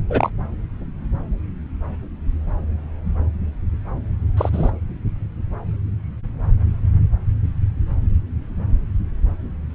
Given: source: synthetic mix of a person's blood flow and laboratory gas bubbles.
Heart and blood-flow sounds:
Doppler ultrasound of blood flow; subclavian vein
0.10-0.30 s: bubbles
4.37-4.50 s: bubbles
4.52-4.71 s: bubbles
From the record:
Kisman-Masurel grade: 122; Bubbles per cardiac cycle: 1 to 2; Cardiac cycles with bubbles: 10 to 50%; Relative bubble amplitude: moderate (0.250 to 0.450); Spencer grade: 2 (many but less than half of the cardiac periods contain bubble signals, singularly or in groups); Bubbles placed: anywhere in the cardiac cycle

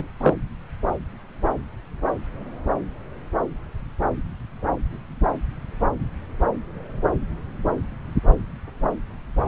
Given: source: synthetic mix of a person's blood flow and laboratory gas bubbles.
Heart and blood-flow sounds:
Doppler ultrasound of blood flow; subclavian vein
0.00-0.07 s: bubbles
0.20-0.34 s: bubbles
From the record:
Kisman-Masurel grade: 212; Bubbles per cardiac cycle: several, 3 to 8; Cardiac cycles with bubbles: 1 to 10%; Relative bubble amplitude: moderate (0.250 to 0.450); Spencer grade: 1 (occasional bubble signal discernible with the cardiac motion signal, with majority of cardiac periods free of bubbles); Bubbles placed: anywhere in the cardiac cycle

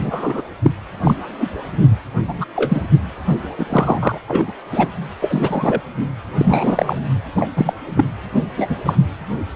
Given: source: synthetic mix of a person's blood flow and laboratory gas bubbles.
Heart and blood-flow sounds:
Doppler ultrasound of blood flow; precordium
0.00-0.42 s: bubbles
0.62-0.71 s: bubbles
1.04-1.16 s: bubbles
1.39-1.49 s: bubbles
2.27-2.45 s: bubbles
2.56-2.88 s: bubbles
3.58-3.66 s: bubbles
3.70-4.18 s: bubbles
4.28-4.52 s: bubbles
4.72-4.88 s: bubbles
5.21-5.80 s: bubbles
6.38-6.96 s: bubbles
7.37-7.49 s: bubbles
7.57-7.73 s: bubbles
7.96-8.05 s: bubbles
8.57-8.76 s: bubbles
8.85-8.95 s: bubbles
From the record:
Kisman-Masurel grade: 243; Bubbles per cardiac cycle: several, 3 to 8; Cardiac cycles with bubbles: 100%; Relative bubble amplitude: loud (0.450 to 0.775); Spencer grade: 3 (all of the cardiac periods contain showers or single bubble signals, but not dominating or overriding the cardiac motion signals); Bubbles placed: anywhere in the cardiac cycle

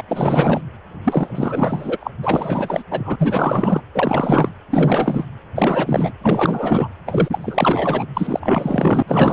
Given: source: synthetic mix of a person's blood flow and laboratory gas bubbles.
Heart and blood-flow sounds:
Doppler ultrasound of blood flow; precordium
0.00-0.02 s: bubbles
0.08-0.61 s: bubbles
1.04-2.11 s: bubbles
2.23-2.83 s: bubbles
2.91-3.16 s: bubbles
3.19-3.81 s: bubbles
3.93-4.49 s: bubbles
4.71-5.25 s: bubbles
5.55-6.12 s: bubbles
6.21-6.88 s: bubbles
7.06-8.06 s: bubbles
8.14-9.02 s: bubbles
9.07-9.33 s: bubbles
From the record:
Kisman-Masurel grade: 444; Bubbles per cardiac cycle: continuous sound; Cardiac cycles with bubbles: 100%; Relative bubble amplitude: maximal (0.775 to 0.999); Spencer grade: 4 (maximum detectable bubble signal sounding continuously throughout systole and diastole of every cardiac period, and overriding the amplitude of the normal cardiac signals); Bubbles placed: anywhere in the cardiac cycle

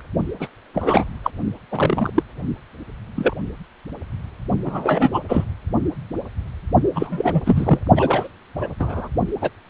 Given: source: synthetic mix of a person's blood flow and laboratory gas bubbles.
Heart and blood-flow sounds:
Doppler ultrasound of blood flow; precordium
0.40-0.48 s: bubbles
0.73-1.05 s: bubbles
1.24-1.31 s: bubbles
1.72-2.10 s: bubbles
2.15-2.23 s: bubbles
3.16-3.35 s: bubbles
4.64-5.20 s: bubbles
5.28-5.44 s: bubbles
6.95-7.42 s: bubbles
7.45-7.79 s: bubbles
7.96-8.28 s: bubbles
8.55-8.68 s: bubbles
8.79-9.08 s: bubbles
9.41-9.50 s: bubbles
From the record:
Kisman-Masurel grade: 232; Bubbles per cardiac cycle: several, 3 to 8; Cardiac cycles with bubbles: 50 to 99%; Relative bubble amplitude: moderate (0.250 to 0.450); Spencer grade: 3 (all of the cardiac periods contain showers or single bubble signals, but not dominating or overriding the cardiac motion signals); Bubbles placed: only in the low amplitude regions of the cardiac cycle

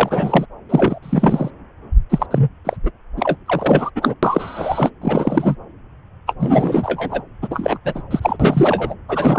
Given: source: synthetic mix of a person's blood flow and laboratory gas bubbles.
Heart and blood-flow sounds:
Doppler ultrasound of blood flow; subclavian vein
0.00-0.45 s: bubbles
0.69-0.99 s: bubbles
1.02-1.50 s: bubbles
2.10-2.27 s: bubbles
2.31-2.49 s: bubbles
2.65-2.77 s: bubbles
2.83-2.91 s: bubbles
3.17-3.37 s: bubbles
3.46-3.90 s: bubbles
3.96-4.14 s: bubbles
4.23-4.91 s: bubbles
5.01-5.56 s: bubbles
6.27-6.34 s: bubbles
6.39-7.21 s: bubbles
7.42-7.48 s: bubbles
7.50-7.78 s: bubbles
7.84-8.03 s: bubbles
8.10-8.36 s: bubbles
8.39-8.94 s: bubbles
9.08-9.39 s: bubbles
From the record:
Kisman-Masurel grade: 343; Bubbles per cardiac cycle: rolling drumbeat, 9 or more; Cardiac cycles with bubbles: 100%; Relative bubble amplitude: loud (0.450 to 0.775); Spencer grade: 3 (all of the cardiac periods contain showers or single bubble signals, but not dominating or overriding the cardiac motion signals); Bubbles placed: anywhere in the cardiac cycle

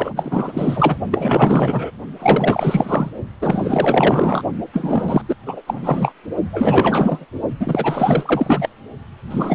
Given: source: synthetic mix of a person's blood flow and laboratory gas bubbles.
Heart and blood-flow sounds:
Doppler ultrasound of blood flow; precordium
0.00-0.11 s: bubbles
0.16-0.96 s: bubbles
1.11-1.91 s: bubbles
2.19-3.10 s: bubbles
3.41-4.42 s: bubbles
4.72-5.21 s: bubbles
5.28-5.35 s: bubbles
5.46-5.62 s: bubbles
5.66-6.14 s: bubbles
6.52-7.25 s: bubbles
7.59-8.69 s: bubbles
9.29-9.54 s: bubbles
From the record:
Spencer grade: 4 (maximum detectable bubble signal sounding continuously throughout systole and diastole of every cardiac period, and overriding the amplitude of the normal cardiac signals); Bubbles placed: only in the low amplitude regions of the cardiac cycle

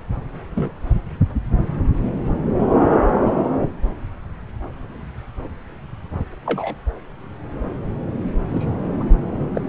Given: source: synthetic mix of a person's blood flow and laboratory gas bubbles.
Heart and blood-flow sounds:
Doppler ultrasound of blood flow; subclavian vein
0.54-0.72 s: bubbles
6.46-6.75 s: bubbles
8.48-8.76 s: bubbles
9.00-9.04 s: bubbles
9.54-9.61 s: bubbles
From the record:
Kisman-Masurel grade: 122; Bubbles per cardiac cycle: 1 to 2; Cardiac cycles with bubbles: 10 to 50%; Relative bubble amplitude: moderate (0.250 to 0.450); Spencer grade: 2 (many but less than half of the cardiac periods contain bubble signals, singularly or in groups); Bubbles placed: anywhere in the cardiac cycle

